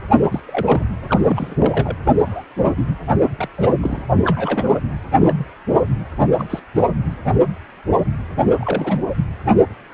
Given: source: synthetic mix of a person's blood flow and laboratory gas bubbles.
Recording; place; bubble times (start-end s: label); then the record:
Doppler ultrasound of blood flow; precordium
0.07-0.28 s: bubbles
0.31-0.40 s: bubbles
0.47-0.84 s: bubbles
1.07-1.56 s: bubbles
1.60-1.96 s: bubbles
2.04-2.10 s: bubbles
2.27-2.45 s: bubbles
2.57-2.74 s: bubbles
2.77-2.89 s: bubbles
3.21-3.29 s: bubbles
3.38-3.48 s: bubbles
3.58-4.02 s: bubbles
4.24-4.80 s: bubbles
5.17-5.52 s: bubbles
6.38-6.60 s: bubbles
6.75-6.84 s: bubbles
8.45-8.55 s: bubbles
8.60-9.03 s: bubbles
From the record:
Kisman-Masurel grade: 232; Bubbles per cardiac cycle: several, 3 to 8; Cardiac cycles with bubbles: 50 to 99%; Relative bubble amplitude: moderate (0.250 to 0.450); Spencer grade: 3 (all of the cardiac periods contain showers or single bubble signals, but not dominating or overriding the cardiac motion signals); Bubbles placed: anywhere in the cardiac cycle